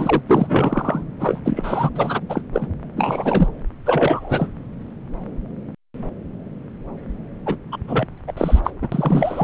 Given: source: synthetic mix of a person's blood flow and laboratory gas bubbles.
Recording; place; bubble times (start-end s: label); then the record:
Doppler ultrasound of blood flow; subclavian vein
0.00-0.22 s: bubbles
0.28-1.05 s: bubbles
1.19-1.41 s: bubbles
1.45-1.89 s: bubbles
1.95-2.20 s: bubbles
2.29-2.42 s: bubbles
2.53-2.67 s: bubbles
2.97-3.51 s: bubbles
3.85-4.48 s: bubbles
7.46-7.57 s: bubbles
7.72-7.77 s: bubbles
7.88-8.06 s: bubbles
8.27-8.32 s: bubbles
8.36-8.60 s: bubbles
8.63-8.71 s: bubbles
8.81-8.88 s: bubbles
8.92-9.44 s: bubbles
From the record:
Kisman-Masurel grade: 332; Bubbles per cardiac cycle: rolling drumbeat, 9 or more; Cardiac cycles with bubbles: 50 to 99%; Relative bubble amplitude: moderate (0.250 to 0.450); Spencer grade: 3 (all of the cardiac periods contain showers or single bubble signals, but not dominating or overriding the cardiac motion signals); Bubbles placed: anywhere in the cardiac cycle